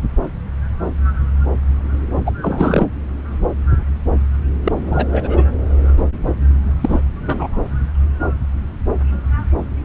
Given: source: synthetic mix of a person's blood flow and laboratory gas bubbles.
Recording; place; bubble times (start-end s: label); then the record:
Doppler ultrasound of blood flow; subclavian vein
2.25-2.31 s: bubbles
2.42-2.88 s: bubbles
4.65-4.73 s: bubbles
4.86-5.08 s: bubbles
5.12-5.43 s: bubbles
6.81-7.00 s: bubbles
7.25-7.58 s: bubbles
From the record:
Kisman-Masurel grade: 223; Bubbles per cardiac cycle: several, 3 to 8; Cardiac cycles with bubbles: 10 to 50%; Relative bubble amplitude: loud (0.450 to 0.775); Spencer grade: 2 (many but less than half of the cardiac periods contain bubble signals, singularly or in groups); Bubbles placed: anywhere in the cardiac cycle